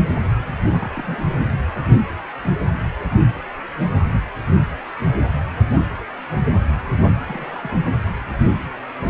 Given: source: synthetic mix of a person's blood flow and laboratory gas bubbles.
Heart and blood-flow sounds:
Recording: Doppler ultrasound of blood flow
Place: precordium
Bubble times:
0.38-0.77 s: bubbles
0.79-1.18 s: bubbles
5.75-5.83 s: bubbles
6.58-6.64 s: bubbles
7.20-7.71 s: bubbles
From the record:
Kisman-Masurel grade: 121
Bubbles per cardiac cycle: 1 to 2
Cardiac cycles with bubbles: 10 to 50%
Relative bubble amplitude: barely perceptible (0.100 to 0.250)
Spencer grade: 2 (many but less than half of the cardiac periods contain bubble signals, singularly or in groups)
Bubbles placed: anywhere in the cardiac cycle

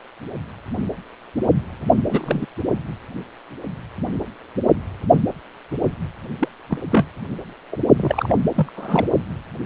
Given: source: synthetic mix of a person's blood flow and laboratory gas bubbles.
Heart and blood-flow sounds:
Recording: Doppler ultrasound of blood flow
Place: precordium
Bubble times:
2.09-2.46 s: bubbles
6.40-6.49 s: bubbles
6.70-6.78 s: bubbles
6.91-7.05 s: bubbles
7.72-7.76 s: bubbles
7.97-8.34 s: bubbles
8.56-8.70 s: bubbles
8.76-9.06 s: bubbles
From the record:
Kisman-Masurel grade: 222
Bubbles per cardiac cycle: several, 3 to 8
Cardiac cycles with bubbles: 10 to 50%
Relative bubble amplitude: moderate (0.250 to 0.450)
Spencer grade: 2 (many but less than half of the cardiac periods contain bubble signals, singularly or in groups)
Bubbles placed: only in the low amplitude regions of the cardiac cycle

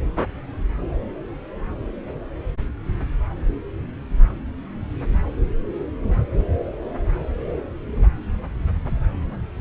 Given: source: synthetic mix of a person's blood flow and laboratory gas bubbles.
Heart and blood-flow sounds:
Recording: Doppler ultrasound of blood flow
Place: subclavian vein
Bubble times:
no bubbles
From the record:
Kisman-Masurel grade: 000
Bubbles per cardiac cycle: 0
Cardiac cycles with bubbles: 0%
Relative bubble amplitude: no bubbles discernible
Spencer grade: 0 (complete lack of bubble signals)

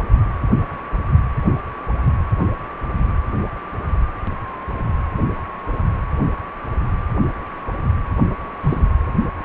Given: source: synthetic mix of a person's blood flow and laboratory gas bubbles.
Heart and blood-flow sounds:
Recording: Doppler ultrasound of blood flow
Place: precordium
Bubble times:
8.62-8.80 s: bubbles
From the record:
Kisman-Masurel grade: 112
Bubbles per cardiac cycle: 1 to 2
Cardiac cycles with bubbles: 1 to 10%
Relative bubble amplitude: moderate (0.250 to 0.450)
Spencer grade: 1 (occasional bubble signal discernible with the cardiac motion signal, with majority of cardiac periods free of bubbles)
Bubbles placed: anywhere in the cardiac cycle

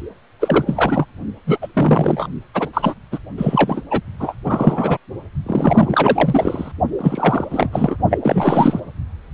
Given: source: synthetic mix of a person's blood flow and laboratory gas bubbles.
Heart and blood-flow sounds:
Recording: Doppler ultrasound of blood flow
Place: precordium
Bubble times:
0.40-1.05 s: bubbles
1.47-1.58 s: bubbles
1.61-1.67 s: bubbles
1.73-2.27 s: bubbles
2.54-2.69 s: bubbles
2.73-2.94 s: bubbles
3.12-3.19 s: bubbles
3.37-3.82 s: bubbles
3.90-4.01 s: bubbles
4.20-4.35 s: bubbles
4.44-4.97 s: bubbles
5.46-6.71 s: bubbles
6.98-7.46 s: bubbles
7.50-7.97 s: bubbles
8.10-8.18 s: bubbles
8.21-8.80 s: bubbles
From the record:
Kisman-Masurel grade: 343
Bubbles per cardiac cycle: rolling drumbeat, 9 or more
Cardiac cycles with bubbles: 100%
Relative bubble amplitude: loud (0.450 to 0.775)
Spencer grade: 3 (all of the cardiac periods contain showers or single bubble signals, but not dominating or overriding the cardiac motion signals)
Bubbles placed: only in the low amplitude regions of the cardiac cycle

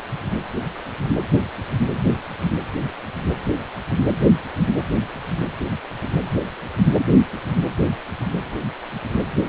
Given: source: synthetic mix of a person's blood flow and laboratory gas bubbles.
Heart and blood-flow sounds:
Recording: Doppler ultrasound of blood flow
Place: precordium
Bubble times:
no bubbles
From the record:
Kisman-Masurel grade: 000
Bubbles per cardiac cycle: 0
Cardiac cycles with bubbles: 0%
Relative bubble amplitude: no bubbles discernible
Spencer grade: 0 (complete lack of bubble signals)

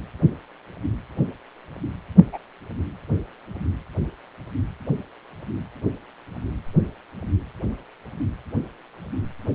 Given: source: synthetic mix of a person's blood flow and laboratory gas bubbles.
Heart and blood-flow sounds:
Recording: Doppler ultrasound of blood flow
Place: precordium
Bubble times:
2.32-2.38 s: bubbles
From the record:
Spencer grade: 1 (occasional bubble signal discernible with the cardiac motion signal, with majority of cardiac periods free of bubbles)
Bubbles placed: anywhere in the cardiac cycle

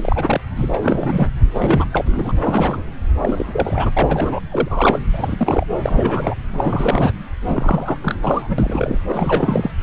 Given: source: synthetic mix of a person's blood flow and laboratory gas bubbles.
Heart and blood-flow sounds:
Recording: Doppler ultrasound of blood flow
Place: subclavian vein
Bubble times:
0.01-0.40 s: bubbles
0.56-1.28 s: bubbles
1.54-1.85 s: bubbles
1.93-2.32 s: bubbles
2.43-2.82 s: bubbles
3.22-3.90 s: bubbles
3.96-4.40 s: bubbles
4.51-4.99 s: bubbles
5.13-5.64 s: bubbles
5.82-6.34 s: bubbles
6.52-7.12 s: bubbles
7.47-7.97 s: bubbles
8.02-8.15 s: bubbles
8.22-8.97 s: bubbles
9.08-9.71 s: bubbles
9.80-9.83 s: bubbles
From the record:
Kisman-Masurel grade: 342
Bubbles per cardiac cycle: rolling drumbeat, 9 or more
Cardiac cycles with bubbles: 100%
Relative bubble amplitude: moderate (0.250 to 0.450)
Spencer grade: 3 (all of the cardiac periods contain showers or single bubble signals, but not dominating or overriding the cardiac motion signals)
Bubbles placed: anywhere in the cardiac cycle

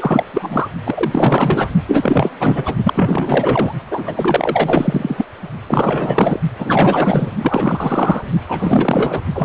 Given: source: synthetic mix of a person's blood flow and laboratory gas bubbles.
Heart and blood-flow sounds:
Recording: Doppler ultrasound of blood flow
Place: precordium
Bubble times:
0.00-0.23 s: bubbles
0.33-0.68 s: bubbles
0.85-1.68 s: bubbles
1.86-2.31 s: bubbles
2.40-2.75 s: bubbles
2.83-3.74 s: bubbles
3.90-5.25 s: bubbles
5.67-6.40 s: bubbles
6.58-7.32 s: bubbles
7.38-8.23 s: bubbles
8.48-9.21 s: bubbles
9.34-9.45 s: bubbles
From the record:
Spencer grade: 4 (maximum detectable bubble signal sounding continuously throughout systole and diastole of every cardiac period, and overriding the amplitude of the normal cardiac signals)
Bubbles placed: only in the low amplitude regions of the cardiac cycle

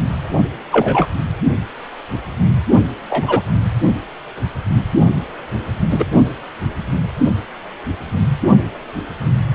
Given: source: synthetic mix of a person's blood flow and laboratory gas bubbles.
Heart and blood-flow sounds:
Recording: Doppler ultrasound of blood flow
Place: precordium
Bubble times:
0.71-1.06 s: bubbles
3.09-3.43 s: bubbles
5.90-6.05 s: bubbles
From the record:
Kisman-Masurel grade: 123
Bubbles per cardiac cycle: 1 to 2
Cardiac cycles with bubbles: 10 to 50%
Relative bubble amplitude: loud (0.450 to 0.775)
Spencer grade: 2 (many but less than half of the cardiac periods contain bubble signals, singularly or in groups)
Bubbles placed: only in the low amplitude regions of the cardiac cycle

